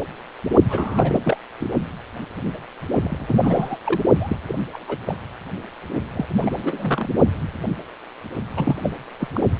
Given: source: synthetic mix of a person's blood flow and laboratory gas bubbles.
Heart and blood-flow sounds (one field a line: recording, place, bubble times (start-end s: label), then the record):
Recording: Doppler ultrasound of blood flow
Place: precordium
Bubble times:
0.69-1.21 s: bubbles
1.24-1.37 s: bubbles
1.60-1.70 s: bubbles
3.02-3.38 s: bubbles
3.42-3.77 s: bubbles
3.84-4.00 s: bubbles
4.19-4.36 s: bubbles
4.48-4.55 s: bubbles
4.72-4.97 s: bubbles
5.06-5.17 s: bubbles
6.13-6.26 s: bubbles
6.40-7.09 s: bubbles
8.56-8.76 s: bubbles
8.82-8.91 s: bubbles
9.20-9.29 s: bubbles
9.33-9.41 s: bubbles
From the record:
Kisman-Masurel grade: 232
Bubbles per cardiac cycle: several, 3 to 8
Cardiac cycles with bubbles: 50 to 99%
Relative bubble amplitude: moderate (0.250 to 0.450)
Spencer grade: 3 (all of the cardiac periods contain showers or single bubble signals, but not dominating or overriding the cardiac motion signals)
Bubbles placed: only in the low amplitude regions of the cardiac cycle